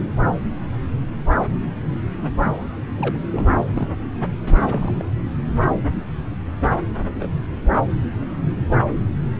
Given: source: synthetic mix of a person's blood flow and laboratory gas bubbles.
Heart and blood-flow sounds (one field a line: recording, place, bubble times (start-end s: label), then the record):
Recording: Doppler ultrasound of blood flow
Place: subclavian vein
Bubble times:
2.42-2.68 s: bubbles
2.96-3.17 s: bubbles
3.30-3.61 s: bubbles
3.65-3.92 s: bubbles
4.43-5.03 s: bubbles
6.73-6.81 s: bubbles
7.19-7.29 s: bubbles
From the record:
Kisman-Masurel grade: 221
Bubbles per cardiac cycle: several, 3 to 8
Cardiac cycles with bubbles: 10 to 50%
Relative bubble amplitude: barely perceptible (0.100 to 0.250)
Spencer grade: 2 (many but less than half of the cardiac periods contain bubble signals, singularly or in groups)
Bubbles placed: anywhere in the cardiac cycle